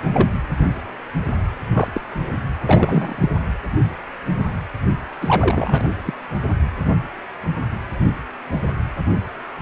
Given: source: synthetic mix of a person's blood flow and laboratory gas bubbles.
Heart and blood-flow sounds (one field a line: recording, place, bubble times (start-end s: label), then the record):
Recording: Doppler ultrasound of blood flow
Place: precordium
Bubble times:
0.14-0.29 s: bubbles
1.73-1.91 s: bubbles
1.94-2.00 s: bubbles
2.65-3.16 s: bubbles
3.21-3.29 s: bubbles
5.21-5.83 s: bubbles
6.06-6.14 s: bubbles
From the record:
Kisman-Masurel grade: 222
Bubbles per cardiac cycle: several, 3 to 8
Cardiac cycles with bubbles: 10 to 50%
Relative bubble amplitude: moderate (0.250 to 0.450)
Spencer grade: 2 (many but less than half of the cardiac periods contain bubble signals, singularly or in groups)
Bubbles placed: anywhere in the cardiac cycle